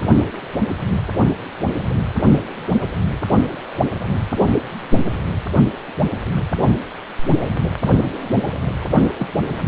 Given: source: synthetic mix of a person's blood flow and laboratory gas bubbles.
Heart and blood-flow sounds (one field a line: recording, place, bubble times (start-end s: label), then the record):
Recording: Doppler ultrasound of blood flow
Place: precordium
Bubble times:
9.18-9.28 s: bubbles
9.59-9.66 s: bubbles
From the record:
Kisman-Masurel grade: 112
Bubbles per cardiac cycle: 1 to 2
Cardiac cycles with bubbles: 1 to 10%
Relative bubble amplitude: moderate (0.250 to 0.450)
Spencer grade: 1 (occasional bubble signal discernible with the cardiac motion signal, with majority of cardiac periods free of bubbles)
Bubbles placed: anywhere in the cardiac cycle